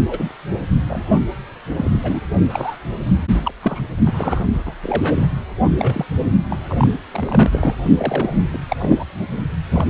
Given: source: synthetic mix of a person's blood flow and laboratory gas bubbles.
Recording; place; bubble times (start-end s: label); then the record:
Doppler ultrasound of blood flow; precordium
0.10-0.31 s: bubbles
0.89-1.22 s: bubbles
1.66-2.20 s: bubbles
2.50-2.77 s: bubbles
3.30-3.52 s: bubbles
3.62-3.82 s: bubbles
4.06-4.45 s: bubbles
4.53-4.74 s: bubbles
4.82-5.27 s: bubbles
5.79-6.06 s: bubbles
6.50-6.56 s: bubbles
6.68-6.88 s: bubbles
7.12-7.76 s: bubbles
7.97-8.58 s: bubbles
8.68-9.04 s: bubbles
9.71-9.85 s: bubbles
From the record:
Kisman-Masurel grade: 342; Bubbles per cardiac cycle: rolling drumbeat, 9 or more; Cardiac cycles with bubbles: 100%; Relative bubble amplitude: moderate (0.250 to 0.450); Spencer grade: 3 (all of the cardiac periods contain showers or single bubble signals, but not dominating or overriding the cardiac motion signals); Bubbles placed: only in the low amplitude regions of the cardiac cycle